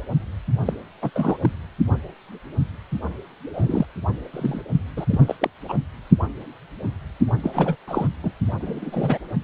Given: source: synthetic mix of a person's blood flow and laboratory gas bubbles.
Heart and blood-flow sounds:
Doppler ultrasound of blood flow; precordium
0.65-0.74 s: bubbles
1.02-1.10 s: bubbles
1.15-1.37 s: bubbles
1.41-1.50 s: bubbles
3.50-3.86 s: bubbles
4.33-4.61 s: bubbles
4.96-5.05 s: bubbles
5.10-5.21 s: bubbles
5.26-5.35 s: bubbles
5.39-5.50 s: bubbles
5.68-5.75 s: bubbles
7.42-7.75 s: bubbles
7.88-8.07 s: bubbles
8.23-8.30 s: bubbles
8.60-9.18 s: bubbles
From the record:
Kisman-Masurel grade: 232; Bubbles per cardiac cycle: several, 3 to 8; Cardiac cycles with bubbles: 50 to 99%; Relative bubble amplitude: moderate (0.250 to 0.450); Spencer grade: 3 (all of the cardiac periods contain showers or single bubble signals, but not dominating or overriding the cardiac motion signals); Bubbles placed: only in the low amplitude regions of the cardiac cycle

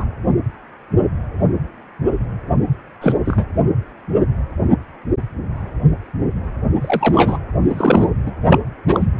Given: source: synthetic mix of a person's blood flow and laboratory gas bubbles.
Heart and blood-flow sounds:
Doppler ultrasound of blood flow; precordium
0.00-0.05 s: bubbles
3.01-3.15 s: bubbles
3.25-3.45 s: bubbles
6.81-7.38 s: bubbles
7.63-8.09 s: bubbles
8.26-8.31 s: bubbles
8.47-8.59 s: bubbles
8.88-9.07 s: bubbles
From the record:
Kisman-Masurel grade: 223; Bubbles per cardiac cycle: several, 3 to 8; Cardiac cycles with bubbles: 10 to 50%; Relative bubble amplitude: loud (0.450 to 0.775); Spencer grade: 2 (many but less than half of the cardiac periods contain bubble signals, singularly or in groups); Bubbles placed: anywhere in the cardiac cycle

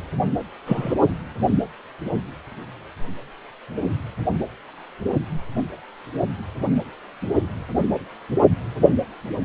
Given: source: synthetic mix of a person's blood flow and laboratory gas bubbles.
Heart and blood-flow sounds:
Doppler ultrasound of blood flow; precordium
0.66-0.95 s: bubbles
From the record:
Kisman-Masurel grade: 123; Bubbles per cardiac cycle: 1 to 2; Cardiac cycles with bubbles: 10 to 50%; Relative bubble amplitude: loud (0.450 to 0.775); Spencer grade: 2 (many but less than half of the cardiac periods contain bubble signals, singularly or in groups); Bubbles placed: only in the low amplitude regions of the cardiac cycle

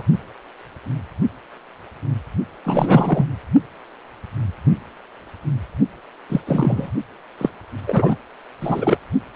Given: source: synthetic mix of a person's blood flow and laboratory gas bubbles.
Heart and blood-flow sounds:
Doppler ultrasound of blood flow; precordium
0.00-0.03 s: bubbles
2.64-3.25 s: bubbles
6.29-6.40 s: bubbles
6.46-6.90 s: bubbles
7.38-7.50 s: bubbles
7.86-8.16 s: bubbles
8.61-8.97 s: bubbles
From the record:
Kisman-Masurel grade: 223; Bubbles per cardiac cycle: several, 3 to 8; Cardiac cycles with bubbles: 10 to 50%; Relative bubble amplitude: loud (0.450 to 0.775); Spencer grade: 2 (many but less than half of the cardiac periods contain bubble signals, singularly or in groups); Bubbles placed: only in the low amplitude regions of the cardiac cycle

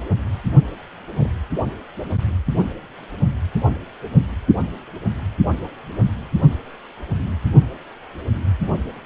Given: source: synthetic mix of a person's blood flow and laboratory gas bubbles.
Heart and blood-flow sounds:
Doppler ultrasound of blood flow; precordium
1.19-1.30 s: bubbles
From the record:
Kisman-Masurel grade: 121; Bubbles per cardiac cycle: 1 to 2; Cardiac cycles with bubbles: 10 to 50%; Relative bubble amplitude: barely perceptible (0.100 to 0.250); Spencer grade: 2 (many but less than half of the cardiac periods contain bubble signals, singularly or in groups); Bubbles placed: only in the low amplitude regions of the cardiac cycle

